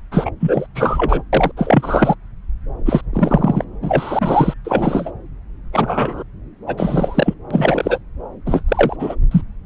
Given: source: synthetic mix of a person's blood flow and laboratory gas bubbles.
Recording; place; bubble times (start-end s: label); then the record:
Doppler ultrasound of blood flow; subclavian vein
0.11-0.30 s: bubbles
0.40-0.67 s: bubbles
0.75-1.22 s: bubbles
1.32-1.51 s: bubbles
1.56-2.15 s: bubbles
2.85-3.01 s: bubbles
3.13-3.65 s: bubbles
3.82-4.54 s: bubbles
4.64-5.11 s: bubbles
5.72-6.23 s: bubbles
6.67-7.34 s: bubbles
7.50-7.98 s: bubbles
8.46-8.62 s: bubbles
8.68-8.96 s: bubbles
8.99-9.15 s: bubbles
9.31-9.41 s: bubbles
From the record:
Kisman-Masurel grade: 343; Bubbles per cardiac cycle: rolling drumbeat, 9 or more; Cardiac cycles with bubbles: 100%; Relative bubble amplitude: loud (0.450 to 0.775); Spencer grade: 3 (all of the cardiac periods contain showers or single bubble signals, but not dominating or overriding the cardiac motion signals); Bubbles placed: anywhere in the cardiac cycle